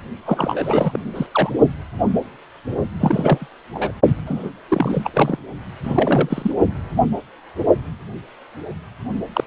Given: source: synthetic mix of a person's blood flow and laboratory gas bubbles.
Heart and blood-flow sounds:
Doppler ultrasound of blood flow; precordium
0.25-0.99 s: bubbles
1.15-1.26 s: bubbles
1.31-1.50 s: bubbles
3.00-3.48 s: bubbles
3.74-3.91 s: bubbles
4.25-4.50 s: bubbles
4.68-5.10 s: bubbles
5.13-5.38 s: bubbles
5.83-6.53 s: bubbles
9.33-9.47 s: bubbles
From the record:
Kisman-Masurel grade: 332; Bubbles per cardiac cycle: rolling drumbeat, 9 or more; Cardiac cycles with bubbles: 50 to 99%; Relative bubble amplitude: moderate (0.250 to 0.450); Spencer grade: 3 (all of the cardiac periods contain showers or single bubble signals, but not dominating or overriding the cardiac motion signals); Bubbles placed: only in the low amplitude regions of the cardiac cycle

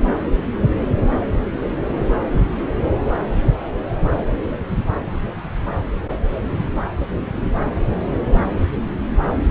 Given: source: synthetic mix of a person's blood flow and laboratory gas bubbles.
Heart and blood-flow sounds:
Doppler ultrasound of blood flow; subclavian vein
no bubbles
From the record:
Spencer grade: 0 (complete lack of bubble signals)

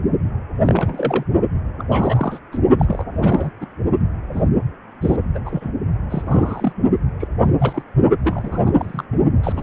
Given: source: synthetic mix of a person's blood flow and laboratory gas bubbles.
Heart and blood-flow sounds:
Doppler ultrasound of blood flow; precordium
0.62-1.24 s: bubbles
1.78-2.39 s: bubbles
2.52-2.59 s: bubbles
2.79-3.04 s: bubbles
3.14-3.50 s: bubbles
3.61-3.67 s: bubbles
4.33-4.49 s: bubbles
5.01-5.16 s: bubbles
5.34-5.38 s: bubbles
5.46-5.71 s: bubbles
6.10-6.73 s: bubbles
7.19-7.28 s: bubbles
7.42-7.50 s: bubbles
7.59-7.83 s: bubbles
8.22-8.71 s: bubbles
8.76-9.04 s: bubbles
9.11-9.18 s: bubbles
9.43-9.63 s: bubbles
From the record:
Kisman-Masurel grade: 242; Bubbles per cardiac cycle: several, 3 to 8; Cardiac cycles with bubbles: 100%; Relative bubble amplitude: moderate (0.250 to 0.450); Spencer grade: 3 (all of the cardiac periods contain showers or single bubble signals, but not dominating or overriding the cardiac motion signals); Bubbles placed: only in the low amplitude regions of the cardiac cycle

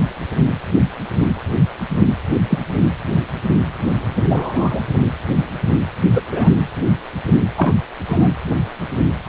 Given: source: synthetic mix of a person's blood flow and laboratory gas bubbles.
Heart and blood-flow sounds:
Doppler ultrasound of blood flow; precordium
2.34-2.40 s: bubbles
2.50-2.59 s: bubbles
4.29-4.81 s: bubbles
6.15-6.21 s: bubbles
6.32-6.49 s: bubbles
7.28-7.33 s: bubbles
7.57-7.73 s: bubbles
8.06-8.29 s: bubbles
From the record:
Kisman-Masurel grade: 123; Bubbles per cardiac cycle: 1 to 2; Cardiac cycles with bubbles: 10 to 50%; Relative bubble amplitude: loud (0.450 to 0.775); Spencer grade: 2 (many but less than half of the cardiac periods contain bubble signals, singularly or in groups); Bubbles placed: anywhere in the cardiac cycle

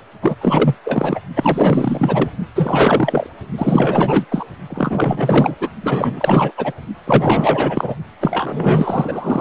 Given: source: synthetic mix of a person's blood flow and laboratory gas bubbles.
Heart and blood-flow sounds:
Doppler ultrasound of blood flow; precordium
0.21-0.35 s: bubbles
0.41-0.75 s: bubbles
0.84-1.20 s: bubbles
1.35-2.30 s: bubbles
2.55-3.27 s: bubbles
3.57-4.25 s: bubbles
4.31-4.45 s: bubbles
4.70-5.55 s: bubbles
5.60-5.69 s: bubbles
5.82-6.52 s: bubbles
6.57-6.72 s: bubbles
7.06-7.96 s: bubbles
8.21-9.41 s: bubbles
From the record:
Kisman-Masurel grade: 444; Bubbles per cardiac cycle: continuous sound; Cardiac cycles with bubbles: 100%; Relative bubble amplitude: maximal (0.775 to 0.999); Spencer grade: 4 (maximum detectable bubble signal sounding continuously throughout systole and diastole of every cardiac period, and overriding the amplitude of the normal cardiac signals); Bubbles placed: only in the low amplitude regions of the cardiac cycle

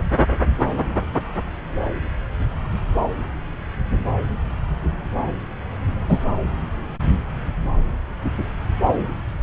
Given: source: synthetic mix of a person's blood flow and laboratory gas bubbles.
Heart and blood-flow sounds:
Doppler ultrasound of blood flow; subclavian vein
6.08-6.20 s: bubbles
From the record:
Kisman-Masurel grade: 113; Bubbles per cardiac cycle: 1 to 2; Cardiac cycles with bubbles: 1 to 10%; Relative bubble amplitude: loud (0.450 to 0.775); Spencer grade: 1 (occasional bubble signal discernible with the cardiac motion signal, with majority of cardiac periods free of bubbles); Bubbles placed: anywhere in the cardiac cycle

